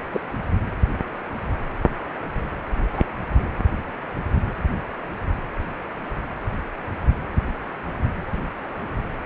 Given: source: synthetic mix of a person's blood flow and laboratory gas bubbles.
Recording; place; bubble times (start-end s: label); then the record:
Doppler ultrasound of blood flow; precordium
0.13-0.20 s: bubbles
2.90-3.02 s: bubbles
From the record:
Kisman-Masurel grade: 122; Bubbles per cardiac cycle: 1 to 2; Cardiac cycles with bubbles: 10 to 50%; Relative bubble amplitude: moderate (0.250 to 0.450); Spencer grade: 2 (many but less than half of the cardiac periods contain bubble signals, singularly or in groups); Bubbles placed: anywhere in the cardiac cycle